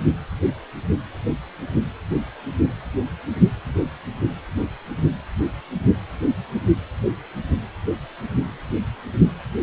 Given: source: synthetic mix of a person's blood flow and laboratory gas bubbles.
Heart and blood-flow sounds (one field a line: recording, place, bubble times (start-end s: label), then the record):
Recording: Doppler ultrasound of blood flow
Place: precordium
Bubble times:
no bubbles
From the record:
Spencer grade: 0 (complete lack of bubble signals)